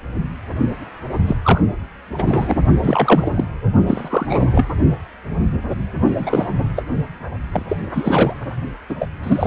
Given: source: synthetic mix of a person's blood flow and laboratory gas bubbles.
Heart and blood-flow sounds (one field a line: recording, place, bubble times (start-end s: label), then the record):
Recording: Doppler ultrasound of blood flow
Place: precordium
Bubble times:
1.27-1.36 s: bubbles
1.43-1.61 s: bubbles
2.18-2.55 s: bubbles
2.82-3.45 s: bubbles
3.87-4.65 s: bubbles
6.17-6.49 s: bubbles
6.76-6.83 s: bubbles
7.53-7.62 s: bubbles
7.69-7.77 s: bubbles
7.93-8.34 s: bubbles
8.89-8.96 s: bubbles
8.99-9.09 s: bubbles
9.23-9.47 s: bubbles
From the record:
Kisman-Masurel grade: 233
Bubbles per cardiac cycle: several, 3 to 8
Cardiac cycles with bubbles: 50 to 99%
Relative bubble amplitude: loud (0.450 to 0.775)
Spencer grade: 3 (all of the cardiac periods contain showers or single bubble signals, but not dominating or overriding the cardiac motion signals)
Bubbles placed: only in the low amplitude regions of the cardiac cycle